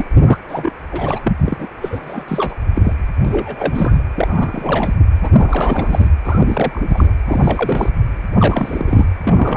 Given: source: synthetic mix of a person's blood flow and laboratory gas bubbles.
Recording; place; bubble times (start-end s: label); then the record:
Doppler ultrasound of blood flow; precordium
0.00-0.05 s: bubbles
0.27-0.40 s: bubbles
0.48-0.71 s: bubbles
0.91-1.20 s: bubbles
1.24-1.33 s: bubbles
1.44-1.68 s: bubbles
1.81-2.24 s: bubbles
2.27-2.54 s: bubbles
2.73-2.94 s: bubbles
3.25-4.04 s: bubbles
4.16-4.94 s: bubbles
5.22-5.32 s: bubbles
5.36-6.09 s: bubbles
6.24-6.81 s: bubbles
6.89-7.13 s: bubbles
7.26-7.89 s: bubbles
8.38-9.07 s: bubbles
9.20-9.57 s: bubbles
From the record:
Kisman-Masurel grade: 343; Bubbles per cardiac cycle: rolling drumbeat, 9 or more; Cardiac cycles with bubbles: 100%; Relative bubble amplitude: loud (0.450 to 0.775); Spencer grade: 3 (all of the cardiac periods contain showers or single bubble signals, but not dominating or overriding the cardiac motion signals); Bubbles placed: anywhere in the cardiac cycle